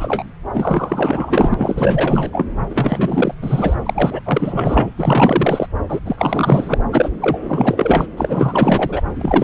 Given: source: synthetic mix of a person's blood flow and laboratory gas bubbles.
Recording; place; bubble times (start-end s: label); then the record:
Doppler ultrasound of blood flow; subclavian vein
0.00-0.23 s: bubbles
0.54-2.46 s: bubbles
2.70-3.35 s: bubbles
3.42-3.75 s: bubbles
3.86-4.21 s: bubbles
4.25-4.90 s: bubbles
4.97-5.67 s: bubbles
5.88-6.00 s: bubbles
6.05-6.78 s: bubbles
6.92-7.09 s: bubbles
7.21-8.07 s: bubbles
8.17-9.02 s: bubbles
9.14-9.44 s: bubbles
From the record:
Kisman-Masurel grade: 444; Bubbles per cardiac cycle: continuous sound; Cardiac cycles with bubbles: 100%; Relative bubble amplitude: maximal (0.775 to 0.999); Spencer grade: 4 (maximum detectable bubble signal sounding continuously throughout systole and diastole of every cardiac period, and overriding the amplitude of the normal cardiac signals); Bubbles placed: anywhere in the cardiac cycle